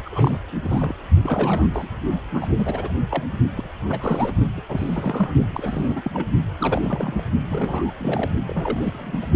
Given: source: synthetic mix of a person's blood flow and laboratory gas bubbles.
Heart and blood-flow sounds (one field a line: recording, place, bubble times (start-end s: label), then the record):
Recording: Doppler ultrasound of blood flow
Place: precordium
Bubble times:
0.05-0.40 s: bubbles
0.64-0.96 s: bubbles
1.23-1.69 s: bubbles
1.73-1.88 s: bubbles
2.33-2.54 s: bubbles
2.58-2.93 s: bubbles
3.09-3.24 s: bubbles
3.56-3.70 s: bubbles
3.80-4.33 s: bubbles
4.57-4.61 s: bubbles
4.68-5.33 s: bubbles
5.53-6.28 s: bubbles
6.58-7.23 s: bubbles
7.50-7.92 s: bubbles
7.98-8.30 s: bubbles
8.47-9.30 s: bubbles
From the record:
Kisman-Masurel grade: 342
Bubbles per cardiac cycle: rolling drumbeat, 9 or more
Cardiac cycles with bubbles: 100%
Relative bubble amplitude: moderate (0.250 to 0.450)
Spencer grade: 3 (all of the cardiac periods contain showers or single bubble signals, but not dominating or overriding the cardiac motion signals)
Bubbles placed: only in the low amplitude regions of the cardiac cycle